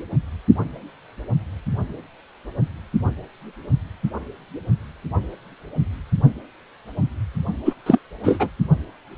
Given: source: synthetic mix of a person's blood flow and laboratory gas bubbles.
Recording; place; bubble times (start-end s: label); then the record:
Doppler ultrasound of blood flow; precordium
7.65-7.74 s: bubbles
7.86-7.99 s: bubbles
8.23-8.49 s: bubbles
From the record:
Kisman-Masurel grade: 213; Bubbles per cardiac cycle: several, 3 to 8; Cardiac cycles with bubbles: 1 to 10%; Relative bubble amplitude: loud (0.450 to 0.775); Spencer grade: 1 (occasional bubble signal discernible with the cardiac motion signal, with majority of cardiac periods free of bubbles); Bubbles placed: only in the low amplitude regions of the cardiac cycle